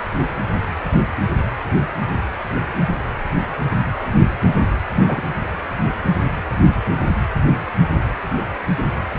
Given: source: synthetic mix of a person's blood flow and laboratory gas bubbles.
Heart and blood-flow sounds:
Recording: Doppler ultrasound of blood flow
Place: precordium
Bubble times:
5.06-5.28 s: bubbles
From the record:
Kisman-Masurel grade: 122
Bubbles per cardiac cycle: 1 to 2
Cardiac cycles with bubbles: 10 to 50%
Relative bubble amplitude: moderate (0.250 to 0.450)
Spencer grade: 2 (many but less than half of the cardiac periods contain bubble signals, singularly or in groups)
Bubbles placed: anywhere in the cardiac cycle

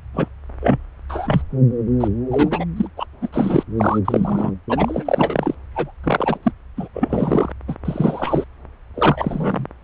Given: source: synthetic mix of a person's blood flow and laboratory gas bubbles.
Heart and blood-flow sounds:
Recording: Doppler ultrasound of blood flow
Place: subclavian vein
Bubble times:
0.13-0.28 s: bubbles
0.60-0.78 s: bubbles
1.09-1.42 s: bubbles
2.00-2.08 s: bubbles
2.31-2.66 s: bubbles
2.76-2.88 s: bubbles
2.97-3.06 s: bubbles
3.22-3.29 s: bubbles
3.33-3.64 s: bubbles
3.78-3.99 s: bubbles
4.04-4.52 s: bubbles
4.69-5.54 s: bubbles
5.75-5.92 s: bubbles
6.04-6.38 s: bubbles
6.42-6.51 s: bubbles
6.76-6.88 s: bubbles
6.93-7.52 s: bubbles
7.67-7.76 s: bubbles
7.84-8.44 s: bubbles
8.94-9.65 s: bubbles
From the record:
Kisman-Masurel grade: 243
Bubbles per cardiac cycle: several, 3 to 8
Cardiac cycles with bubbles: 100%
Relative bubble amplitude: loud (0.450 to 0.775)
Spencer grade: 3 (all of the cardiac periods contain showers or single bubble signals, but not dominating or overriding the cardiac motion signals)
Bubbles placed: anywhere in the cardiac cycle

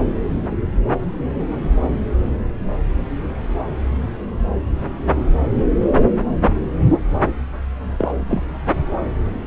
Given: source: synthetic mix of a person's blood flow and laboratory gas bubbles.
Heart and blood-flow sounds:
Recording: Doppler ultrasound of blood flow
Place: subclavian vein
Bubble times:
7.98-8.15 s: bubbles
8.28-8.43 s: bubbles
From the record:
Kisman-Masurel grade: 112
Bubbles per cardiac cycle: 1 to 2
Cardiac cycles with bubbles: 1 to 10%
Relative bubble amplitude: moderate (0.250 to 0.450)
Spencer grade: 1 (occasional bubble signal discernible with the cardiac motion signal, with majority of cardiac periods free of bubbles)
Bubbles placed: anywhere in the cardiac cycle

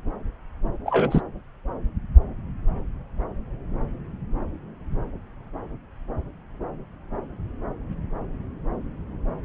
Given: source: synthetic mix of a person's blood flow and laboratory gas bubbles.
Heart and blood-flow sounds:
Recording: Doppler ultrasound of blood flow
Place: subclavian vein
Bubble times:
0.85-1.21 s: bubbles
From the record:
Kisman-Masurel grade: 113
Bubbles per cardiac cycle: 1 to 2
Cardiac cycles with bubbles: 1 to 10%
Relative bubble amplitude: loud (0.450 to 0.775)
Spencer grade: 1 (occasional bubble signal discernible with the cardiac motion signal, with majority of cardiac periods free of bubbles)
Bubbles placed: anywhere in the cardiac cycle

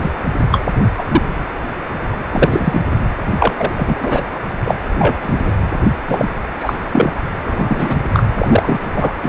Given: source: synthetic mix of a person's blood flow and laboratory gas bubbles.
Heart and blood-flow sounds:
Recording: Doppler ultrasound of blood flow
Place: precordium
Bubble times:
0.00-0.11 s: bubbles
0.50-0.66 s: bubbles
0.97-1.05 s: bubbles
1.11-1.22 s: bubbles
2.31-2.81 s: bubbles
3.38-3.54 s: bubbles
3.57-3.96 s: bubbles
4.00-4.22 s: bubbles
4.64-4.75 s: bubbles
4.99-5.14 s: bubbles
5.22-5.43 s: bubbles
5.46-5.52 s: bubbles
6.08-6.27 s: bubbles
6.59-6.76 s: bubbles
6.92-7.11 s: bubbles
7.46-7.97 s: bubbles
8.13-8.26 s: bubbles
8.38-8.80 s: bubbles
8.96-9.12 s: bubbles
9.22-9.29 s: bubbles
From the record:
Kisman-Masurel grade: 233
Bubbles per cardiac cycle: several, 3 to 8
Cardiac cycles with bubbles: 50 to 99%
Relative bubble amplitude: loud (0.450 to 0.775)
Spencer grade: 3 (all of the cardiac periods contain showers or single bubble signals, but not dominating or overriding the cardiac motion signals)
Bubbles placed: anywhere in the cardiac cycle

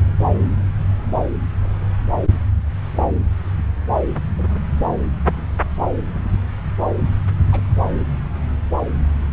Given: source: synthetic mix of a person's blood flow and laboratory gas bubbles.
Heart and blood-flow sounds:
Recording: Doppler ultrasound of blood flow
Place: subclavian vein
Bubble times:
2.96-3.03 s: bubbles
4.38-4.58 s: bubbles
7.51-7.61 s: bubbles
From the record:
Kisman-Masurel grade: 121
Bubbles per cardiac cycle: 1 to 2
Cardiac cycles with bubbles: 10 to 50%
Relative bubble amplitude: barely perceptible (0.100 to 0.250)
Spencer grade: 2 (many but less than half of the cardiac periods contain bubble signals, singularly or in groups)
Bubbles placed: anywhere in the cardiac cycle

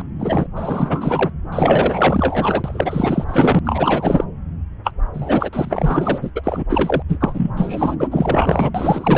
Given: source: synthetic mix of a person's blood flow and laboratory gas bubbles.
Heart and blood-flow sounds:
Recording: Doppler ultrasound of blood flow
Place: subclavian vein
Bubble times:
0.00-0.02 s: bubbles
0.20-0.47 s: bubbles
0.56-1.30 s: bubbles
1.52-3.24 s: bubbles
3.28-3.59 s: bubbles
3.65-4.25 s: bubbles
4.84-4.92 s: bubbles
5.13-6.19 s: bubbles
6.21-6.31 s: bubbles
6.35-6.64 s: bubbles
6.69-7.03 s: bubbles
7.08-7.51 s: bubbles
7.56-7.96 s: bubbles
8.00-8.08 s: bubbles
8.11-8.71 s: bubbles
8.75-9.18 s: bubbles
From the record:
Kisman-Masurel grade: 444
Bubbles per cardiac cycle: continuous sound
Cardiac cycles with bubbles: 100%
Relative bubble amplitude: maximal (0.775 to 0.999)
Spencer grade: 4 (maximum detectable bubble signal sounding continuously throughout systole and diastole of every cardiac period, and overriding the amplitude of the normal cardiac signals)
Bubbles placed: anywhere in the cardiac cycle

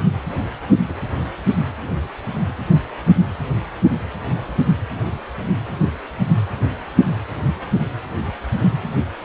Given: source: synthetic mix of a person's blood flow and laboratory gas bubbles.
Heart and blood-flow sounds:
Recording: Doppler ultrasound of blood flow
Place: precordium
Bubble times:
0.89-0.94 s: bubbles
From the record:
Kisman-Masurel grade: 111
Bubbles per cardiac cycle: 1 to 2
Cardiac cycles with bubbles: 1 to 10%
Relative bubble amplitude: barely perceptible (0.100 to 0.250)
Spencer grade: 1 (occasional bubble signal discernible with the cardiac motion signal, with majority of cardiac periods free of bubbles)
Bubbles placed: anywhere in the cardiac cycle

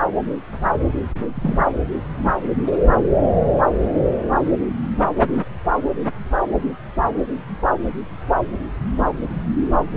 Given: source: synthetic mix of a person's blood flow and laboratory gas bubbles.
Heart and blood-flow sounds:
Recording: Doppler ultrasound of blood flow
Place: subclavian vein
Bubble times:
1.35-1.66 s: bubbles
From the record:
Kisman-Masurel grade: 112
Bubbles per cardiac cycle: 1 to 2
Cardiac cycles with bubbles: 1 to 10%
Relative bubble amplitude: moderate (0.250 to 0.450)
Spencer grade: 1 (occasional bubble signal discernible with the cardiac motion signal, with majority of cardiac periods free of bubbles)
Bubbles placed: anywhere in the cardiac cycle

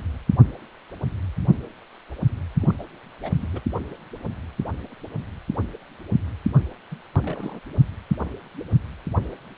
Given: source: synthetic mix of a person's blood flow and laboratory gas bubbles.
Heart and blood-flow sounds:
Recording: Doppler ultrasound of blood flow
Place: precordium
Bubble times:
2.61-2.74 s: bubbles
2.78-2.83 s: bubbles
3.23-3.31 s: bubbles
3.42-3.48 s: bubbles
3.52-3.60 s: bubbles
6.91-6.98 s: bubbles
7.22-7.59 s: bubbles
From the record:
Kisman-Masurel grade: 221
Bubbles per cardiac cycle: several, 3 to 8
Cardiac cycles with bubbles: 10 to 50%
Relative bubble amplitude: barely perceptible (0.100 to 0.250)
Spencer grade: 2 (many but less than half of the cardiac periods contain bubble signals, singularly or in groups)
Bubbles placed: only in the low amplitude regions of the cardiac cycle

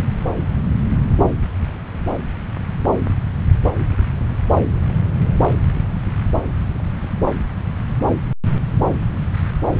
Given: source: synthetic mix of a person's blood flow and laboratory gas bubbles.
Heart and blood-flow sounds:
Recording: Doppler ultrasound of blood flow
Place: subclavian vein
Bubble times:
no bubbles
From the record:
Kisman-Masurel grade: 000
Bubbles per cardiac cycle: 0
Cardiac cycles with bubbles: 0%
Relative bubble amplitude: no bubbles discernible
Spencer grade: 0 (complete lack of bubble signals)

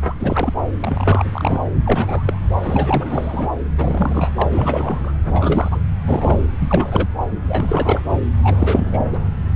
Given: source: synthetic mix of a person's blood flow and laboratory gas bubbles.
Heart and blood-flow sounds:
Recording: Doppler ultrasound of blood flow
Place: subclavian vein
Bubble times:
0.00-0.02 s: bubbles
0.06-0.15 s: bubbles
0.20-0.53 s: bubbles
0.80-1.60 s: bubbles
1.84-2.44 s: bubbles
2.62-3.48 s: bubbles
3.77-4.48 s: bubbles
4.52-5.14 s: bubbles
5.34-5.80 s: bubbles
6.04-6.43 s: bubbles
6.58-7.08 s: bubbles
7.42-8.02 s: bubbles
8.43-9.04 s: bubbles
9.12-9.18 s: bubbles
From the record:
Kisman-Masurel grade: 342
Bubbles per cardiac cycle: rolling drumbeat, 9 or more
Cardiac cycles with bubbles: 100%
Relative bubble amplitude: moderate (0.250 to 0.450)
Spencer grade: 3 (all of the cardiac periods contain showers or single bubble signals, but not dominating or overriding the cardiac motion signals)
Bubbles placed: anywhere in the cardiac cycle

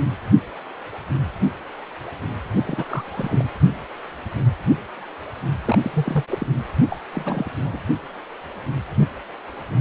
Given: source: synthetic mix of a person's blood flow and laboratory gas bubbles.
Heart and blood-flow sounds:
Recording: Doppler ultrasound of blood flow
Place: precordium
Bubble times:
2.64-3.47 s: bubbles
5.64-5.76 s: bubbles
5.81-5.91 s: bubbles
5.93-6.25 s: bubbles
6.30-6.46 s: bubbles
6.89-6.99 s: bubbles
7.13-7.51 s: bubbles
7.65-7.80 s: bubbles
From the record:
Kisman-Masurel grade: 221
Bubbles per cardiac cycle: several, 3 to 8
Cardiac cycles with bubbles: 10 to 50%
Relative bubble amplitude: barely perceptible (0.100 to 0.250)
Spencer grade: 2 (many but less than half of the cardiac periods contain bubble signals, singularly or in groups)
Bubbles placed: only in the low amplitude regions of the cardiac cycle

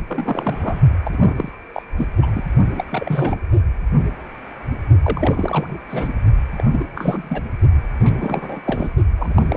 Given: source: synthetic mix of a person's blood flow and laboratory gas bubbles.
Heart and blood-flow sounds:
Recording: Doppler ultrasound of blood flow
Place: precordium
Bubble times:
0.07-0.81 s: bubbles
1.05-1.33 s: bubbles
1.36-1.52 s: bubbles
1.73-1.83 s: bubbles
1.98-2.08 s: bubbles
2.22-2.42 s: bubbles
2.72-2.84 s: bubbles
2.92-3.39 s: bubbles
5.02-5.78 s: bubbles
5.89-6.13 s: bubbles
6.56-6.66 s: bubbles
6.72-6.84 s: bubbles
6.94-7.42 s: bubbles
7.99-8.12 s: bubbles
8.20-8.61 s: bubbles
8.65-8.91 s: bubbles
9.18-9.57 s: bubbles
From the record:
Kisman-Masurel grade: 332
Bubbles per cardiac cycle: rolling drumbeat, 9 or more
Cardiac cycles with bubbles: 50 to 99%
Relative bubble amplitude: moderate (0.250 to 0.450)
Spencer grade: 3 (all of the cardiac periods contain showers or single bubble signals, but not dominating or overriding the cardiac motion signals)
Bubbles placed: only in the low amplitude regions of the cardiac cycle

